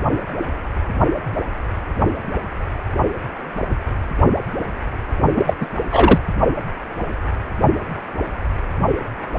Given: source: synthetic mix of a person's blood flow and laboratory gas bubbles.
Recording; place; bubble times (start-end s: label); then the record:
Doppler ultrasound of blood flow; precordium
5.36-5.54 s: bubbles
5.60-5.67 s: bubbles
5.91-6.18 s: bubbles
From the record:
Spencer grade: 2 (many but less than half of the cardiac periods contain bubble signals, singularly or in groups); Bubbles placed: only in the low amplitude regions of the cardiac cycle